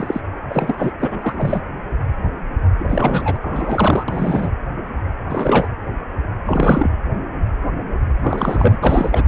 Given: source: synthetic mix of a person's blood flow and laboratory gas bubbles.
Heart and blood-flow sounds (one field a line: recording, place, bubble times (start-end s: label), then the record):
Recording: Doppler ultrasound of blood flow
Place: precordium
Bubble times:
0.00-0.20 s: bubbles
0.48-0.92 s: bubbles
0.99-1.62 s: bubbles
2.78-3.38 s: bubbles
3.42-4.04 s: bubbles
4.08-4.52 s: bubbles
5.29-5.68 s: bubbles
6.46-6.90 s: bubbles
8.22-8.79 s: bubbles
8.83-9.24 s: bubbles
From the record:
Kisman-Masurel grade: 333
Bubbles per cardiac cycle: rolling drumbeat, 9 or more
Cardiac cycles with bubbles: 50 to 99%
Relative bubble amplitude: loud (0.450 to 0.775)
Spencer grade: 3 (all of the cardiac periods contain showers or single bubble signals, but not dominating or overriding the cardiac motion signals)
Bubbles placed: anywhere in the cardiac cycle